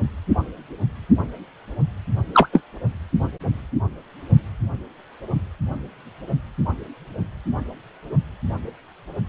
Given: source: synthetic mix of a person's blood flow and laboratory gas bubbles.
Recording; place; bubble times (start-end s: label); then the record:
Doppler ultrasound of blood flow; precordium
2.33-2.49 s: bubbles
2.52-2.62 s: bubbles
From the record:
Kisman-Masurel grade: 113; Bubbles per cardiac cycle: 1 to 2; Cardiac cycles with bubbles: 1 to 10%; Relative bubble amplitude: loud (0.450 to 0.775); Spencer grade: 1 (occasional bubble signal discernible with the cardiac motion signal, with majority of cardiac periods free of bubbles); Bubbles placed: only in the low amplitude regions of the cardiac cycle